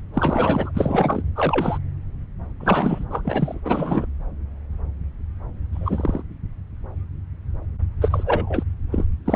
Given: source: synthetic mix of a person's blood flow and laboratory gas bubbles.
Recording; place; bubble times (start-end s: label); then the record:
Doppler ultrasound of blood flow; subclavian vein
0.14-0.72 s: bubbles
0.74-1.23 s: bubbles
1.35-1.78 s: bubbles
2.60-3.05 s: bubbles
3.10-3.60 s: bubbles
3.65-4.06 s: bubbles
5.73-6.23 s: bubbles
8.01-8.63 s: bubbles
8.92-9.04 s: bubbles
9.26-9.36 s: bubbles
From the record:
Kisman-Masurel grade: 222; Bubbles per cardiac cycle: several, 3 to 8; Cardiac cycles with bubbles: 10 to 50%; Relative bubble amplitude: moderate (0.250 to 0.450); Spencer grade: 2 (many but less than half of the cardiac periods contain bubble signals, singularly or in groups); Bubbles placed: anywhere in the cardiac cycle